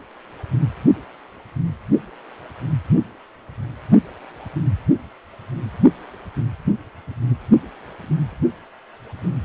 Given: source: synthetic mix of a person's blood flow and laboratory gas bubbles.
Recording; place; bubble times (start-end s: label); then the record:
Doppler ultrasound of blood flow; precordium
no bubbles
From the record:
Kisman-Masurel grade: 000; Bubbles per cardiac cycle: 0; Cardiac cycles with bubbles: 0%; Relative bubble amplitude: no bubbles discernible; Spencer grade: 0 (complete lack of bubble signals)